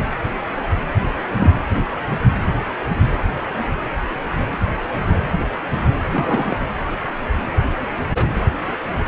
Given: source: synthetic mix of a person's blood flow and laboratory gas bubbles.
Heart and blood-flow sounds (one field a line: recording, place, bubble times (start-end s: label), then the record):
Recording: Doppler ultrasound of blood flow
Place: precordium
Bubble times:
1.36-1.50 s: bubbles
6.03-6.08 s: bubbles
6.11-6.57 s: bubbles
8.14-8.33 s: bubbles
From the record:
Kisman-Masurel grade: 122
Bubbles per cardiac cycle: 1 to 2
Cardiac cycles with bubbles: 10 to 50%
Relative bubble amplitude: moderate (0.250 to 0.450)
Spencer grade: 2 (many but less than half of the cardiac periods contain bubble signals, singularly or in groups)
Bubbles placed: anywhere in the cardiac cycle